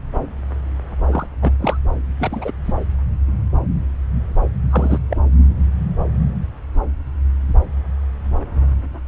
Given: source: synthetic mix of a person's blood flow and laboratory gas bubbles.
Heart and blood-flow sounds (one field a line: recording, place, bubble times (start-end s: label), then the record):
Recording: Doppler ultrasound of blood flow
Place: subclavian vein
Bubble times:
1.10-1.26 s: bubbles
1.42-1.54 s: bubbles
1.59-1.78 s: bubbles
2.20-2.51 s: bubbles
2.64-2.72 s: bubbles
4.71-4.98 s: bubbles
5.10-5.17 s: bubbles
From the record:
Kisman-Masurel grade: 222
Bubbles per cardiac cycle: several, 3 to 8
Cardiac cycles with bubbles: 10 to 50%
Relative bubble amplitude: moderate (0.250 to 0.450)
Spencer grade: 2 (many but less than half of the cardiac periods contain bubble signals, singularly or in groups)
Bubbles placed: anywhere in the cardiac cycle